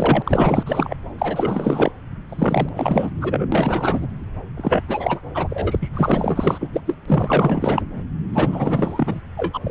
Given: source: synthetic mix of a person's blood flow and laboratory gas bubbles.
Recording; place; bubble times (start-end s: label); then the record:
Doppler ultrasound of blood flow; subclavian vein
0.00-0.63 s: bubbles
0.66-0.95 s: bubbles
1.18-1.92 s: bubbles
2.29-2.69 s: bubbles
2.75-3.13 s: bubbles
3.21-3.46 s: bubbles
3.52-4.07 s: bubbles
4.57-4.83 s: bubbles
4.88-5.21 s: bubbles
5.34-5.89 s: bubbles
5.94-6.81 s: bubbles
6.87-6.97 s: bubbles
7.04-7.82 s: bubbles
8.33-9.21 s: bubbles
9.37-9.60 s: bubbles
9.64-9.71 s: bubbles
From the record:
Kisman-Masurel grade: 444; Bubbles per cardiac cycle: continuous sound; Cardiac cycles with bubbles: 100%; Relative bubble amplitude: maximal (0.775 to 0.999); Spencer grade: 4 (maximum detectable bubble signal sounding continuously throughout systole and diastole of every cardiac period, and overriding the amplitude of the normal cardiac signals); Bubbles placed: anywhere in the cardiac cycle